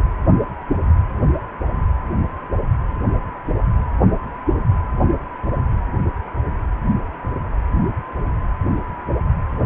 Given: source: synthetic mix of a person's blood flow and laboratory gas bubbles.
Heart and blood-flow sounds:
Doppler ultrasound of blood flow; precordium
0.00-0.04 s: bubbles
From the record:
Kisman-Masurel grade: 212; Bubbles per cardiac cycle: several, 3 to 8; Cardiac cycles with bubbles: 1 to 10%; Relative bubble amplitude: moderate (0.250 to 0.450); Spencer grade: 1 (occasional bubble signal discernible with the cardiac motion signal, with majority of cardiac periods free of bubbles); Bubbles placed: anywhere in the cardiac cycle

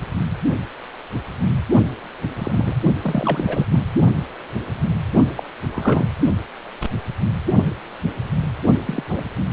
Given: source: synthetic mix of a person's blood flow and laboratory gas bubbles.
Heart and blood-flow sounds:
Doppler ultrasound of blood flow; precordium
2.28-2.77 s: bubbles
3.03-3.66 s: bubbles
3.71-3.79 s: bubbles
5.37-5.43 s: bubbles
5.74-6.06 s: bubbles
8.86-9.04 s: bubbles
9.09-9.23 s: bubbles
From the record:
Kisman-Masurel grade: 222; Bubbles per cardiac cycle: several, 3 to 8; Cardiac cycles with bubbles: 10 to 50%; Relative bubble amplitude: moderate (0.250 to 0.450); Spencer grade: 2 (many but less than half of the cardiac periods contain bubble signals, singularly or in groups); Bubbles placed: only in the low amplitude regions of the cardiac cycle

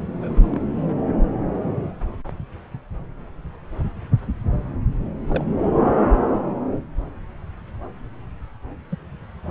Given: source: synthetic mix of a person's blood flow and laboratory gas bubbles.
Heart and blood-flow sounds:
Doppler ultrasound of blood flow; subclavian vein
0.08-0.62 s: bubbles
5.29-5.45 s: bubbles
8.91-8.96 s: bubbles
From the record:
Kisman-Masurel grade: 121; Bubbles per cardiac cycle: 1 to 2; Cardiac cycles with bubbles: 10 to 50%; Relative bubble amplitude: barely perceptible (0.100 to 0.250); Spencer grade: 2 (many but less than half of the cardiac periods contain bubble signals, singularly or in groups); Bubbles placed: anywhere in the cardiac cycle

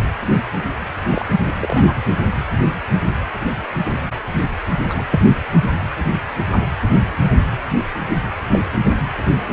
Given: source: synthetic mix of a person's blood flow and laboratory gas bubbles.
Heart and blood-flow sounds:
Doppler ultrasound of blood flow; precordium
1.11-1.25 s: bubbles
1.61-1.95 s: bubbles
4.89-5.03 s: bubbles
5.10-5.21 s: bubbles
8.09-8.19 s: bubbles
8.52-8.59 s: bubbles
From the record:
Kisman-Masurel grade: 122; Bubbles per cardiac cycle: 1 to 2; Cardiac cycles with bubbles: 10 to 50%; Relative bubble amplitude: moderate (0.250 to 0.450); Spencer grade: 2 (many but less than half of the cardiac periods contain bubble signals, singularly or in groups); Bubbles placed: anywhere in the cardiac cycle

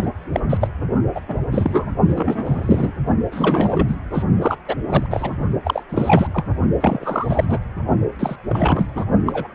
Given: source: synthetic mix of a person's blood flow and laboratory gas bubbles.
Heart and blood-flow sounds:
Doppler ultrasound of blood flow; precordium
0.00-0.09 s: bubbles
0.34-0.40 s: bubbles
0.49-0.57 s: bubbles
0.60-0.68 s: bubbles
1.14-1.21 s: bubbles
1.27-1.40 s: bubbles
1.52-1.87 s: bubbles
2.08-2.92 s: bubbles
3.31-3.96 s: bubbles
4.13-4.24 s: bubbles
4.41-4.57 s: bubbles
4.67-4.75 s: bubbles
4.88-5.07 s: bubbles
5.11-5.36 s: bubbles
5.65-5.83 s: bubbles
5.89-6.27 s: bubbles
6.33-6.44 s: bubbles
6.80-7.58 s: bubbles
8.19-8.35 s: bubbles
8.48-8.86 s: bubbles
8.95-9.04 s: bubbles
9.26-9.47 s: bubbles
From the record:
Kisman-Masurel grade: 343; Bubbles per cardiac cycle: rolling drumbeat, 9 or more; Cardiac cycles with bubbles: 100%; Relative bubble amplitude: loud (0.450 to 0.775); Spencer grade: 3 (all of the cardiac periods contain showers or single bubble signals, but not dominating or overriding the cardiac motion signals); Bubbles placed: only in the low amplitude regions of the cardiac cycle

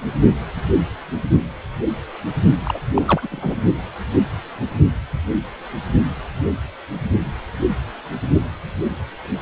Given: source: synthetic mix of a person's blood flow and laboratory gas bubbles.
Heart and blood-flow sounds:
Doppler ultrasound of blood flow; precordium
2.63-2.80 s: bubbles
2.94-3.27 s: bubbles
3.30-3.56 s: bubbles
From the record:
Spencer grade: 2 (many but less than half of the cardiac periods contain bubble signals, singularly or in groups); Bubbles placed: only in the low amplitude regions of the cardiac cycle

